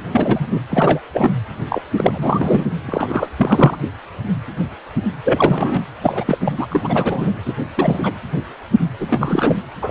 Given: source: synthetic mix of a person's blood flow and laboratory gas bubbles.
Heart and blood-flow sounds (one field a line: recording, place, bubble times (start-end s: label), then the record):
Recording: Doppler ultrasound of blood flow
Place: precordium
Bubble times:
0.12-0.46 s: bubbles
0.51-0.59 s: bubbles
0.70-1.00 s: bubbles
1.14-1.38 s: bubbles
1.70-1.81 s: bubbles
1.96-2.67 s: bubbles
2.87-3.29 s: bubbles
3.38-3.77 s: bubbles
5.24-5.82 s: bubbles
6.02-6.24 s: bubbles
6.27-6.38 s: bubbles
6.41-6.67 s: bubbles
6.71-7.33 s: bubbles
7.45-7.53 s: bubbles
7.77-8.12 s: bubbles
9.00-9.60 s: bubbles
9.81-9.91 s: bubbles
From the record:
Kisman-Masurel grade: 333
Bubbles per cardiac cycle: rolling drumbeat, 9 or more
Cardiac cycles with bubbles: 50 to 99%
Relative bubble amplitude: loud (0.450 to 0.775)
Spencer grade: 3 (all of the cardiac periods contain showers or single bubble signals, but not dominating or overriding the cardiac motion signals)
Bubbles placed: anywhere in the cardiac cycle